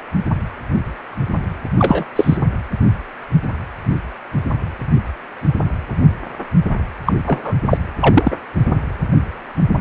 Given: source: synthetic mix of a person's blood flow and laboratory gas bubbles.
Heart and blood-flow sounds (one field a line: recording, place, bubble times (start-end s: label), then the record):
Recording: Doppler ultrasound of blood flow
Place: precordium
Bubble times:
1.78-2.04 s: bubbles
2.16-2.37 s: bubbles
7.05-7.13 s: bubbles
7.26-7.56 s: bubbles
7.70-7.77 s: bubbles
8.01-8.37 s: bubbles
From the record:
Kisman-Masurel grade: 223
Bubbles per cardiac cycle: several, 3 to 8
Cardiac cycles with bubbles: 10 to 50%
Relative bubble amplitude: loud (0.450 to 0.775)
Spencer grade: 2 (many but less than half of the cardiac periods contain bubble signals, singularly or in groups)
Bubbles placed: anywhere in the cardiac cycle